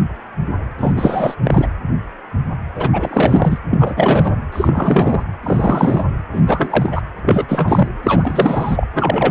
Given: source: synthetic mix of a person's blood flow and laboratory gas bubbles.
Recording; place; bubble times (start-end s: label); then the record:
Doppler ultrasound of blood flow; precordium
0.78-0.93 s: bubbles
0.96-1.34 s: bubbles
1.43-1.67 s: bubbles
2.75-2.90 s: bubbles
2.93-3.58 s: bubbles
3.70-4.35 s: bubbles
4.52-5.23 s: bubbles
5.43-6.04 s: bubbles
6.33-6.42 s: bubbles
6.46-7.02 s: bubbles
7.22-7.45 s: bubbles
7.48-7.89 s: bubbles
8.03-8.88 s: bubbles
8.94-9.31 s: bubbles
From the record:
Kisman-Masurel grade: 333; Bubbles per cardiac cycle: rolling drumbeat, 9 or more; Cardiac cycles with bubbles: 50 to 99%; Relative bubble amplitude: loud (0.450 to 0.775); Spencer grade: 3 (all of the cardiac periods contain showers or single bubble signals, but not dominating or overriding the cardiac motion signals); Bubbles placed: anywhere in the cardiac cycle